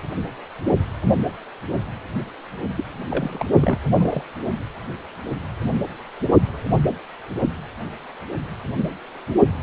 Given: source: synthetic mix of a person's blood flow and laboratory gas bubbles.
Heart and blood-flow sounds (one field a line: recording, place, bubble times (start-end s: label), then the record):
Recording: Doppler ultrasound of blood flow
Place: precordium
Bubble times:
2.77-2.84 s: bubbles
3.10-3.46 s: bubbles
3.61-3.79 s: bubbles
3.98-4.23 s: bubbles
From the record:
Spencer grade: 1 (occasional bubble signal discernible with the cardiac motion signal, with majority of cardiac periods free of bubbles)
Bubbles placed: anywhere in the cardiac cycle